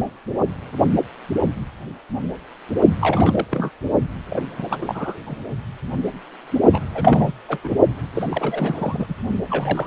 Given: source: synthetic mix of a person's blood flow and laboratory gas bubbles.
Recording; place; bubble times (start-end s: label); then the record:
Doppler ultrasound of blood flow; precordium
3.00-3.45 s: bubbles
3.51-3.72 s: bubbles
4.30-5.19 s: bubbles
5.26-5.36 s: bubbles
6.73-6.80 s: bubbles
6.95-7.32 s: bubbles
7.48-7.58 s: bubbles
7.63-7.69 s: bubbles
8.14-9.15 s: bubbles
9.50-9.87 s: bubbles
From the record:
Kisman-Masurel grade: 332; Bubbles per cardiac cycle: rolling drumbeat, 9 or more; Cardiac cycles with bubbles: 50 to 99%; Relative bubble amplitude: moderate (0.250 to 0.450); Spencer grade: 3 (all of the cardiac periods contain showers or single bubble signals, but not dominating or overriding the cardiac motion signals); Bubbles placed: only in the low amplitude regions of the cardiac cycle